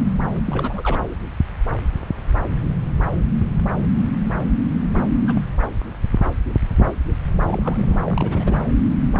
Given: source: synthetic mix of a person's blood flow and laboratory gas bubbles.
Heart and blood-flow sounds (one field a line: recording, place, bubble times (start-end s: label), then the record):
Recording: Doppler ultrasound of blood flow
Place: subclavian vein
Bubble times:
0.45-1.03 s: bubbles
4.96-5.11 s: bubbles
5.28-5.42 s: bubbles
7.42-7.97 s: bubbles
8.07-8.61 s: bubbles
From the record:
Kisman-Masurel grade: 221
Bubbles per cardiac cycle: several, 3 to 8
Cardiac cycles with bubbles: 10 to 50%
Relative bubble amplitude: barely perceptible (0.100 to 0.250)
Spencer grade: 2 (many but less than half of the cardiac periods contain bubble signals, singularly or in groups)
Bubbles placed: anywhere in the cardiac cycle